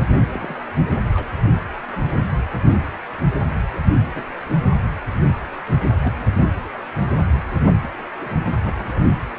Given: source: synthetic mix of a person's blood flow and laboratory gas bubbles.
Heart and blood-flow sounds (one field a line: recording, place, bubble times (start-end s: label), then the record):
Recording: Doppler ultrasound of blood flow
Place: precordium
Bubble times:
0.33-0.67 s: bubbles
1.14-1.29 s: bubbles
4.14-4.28 s: bubbles
6.03-6.11 s: bubbles
8.21-8.31 s: bubbles
8.64-9.07 s: bubbles
From the record:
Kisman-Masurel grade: 121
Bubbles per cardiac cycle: 1 to 2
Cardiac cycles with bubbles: 10 to 50%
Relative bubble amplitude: barely perceptible (0.100 to 0.250)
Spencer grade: 2 (many but less than half of the cardiac periods contain bubble signals, singularly or in groups)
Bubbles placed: anywhere in the cardiac cycle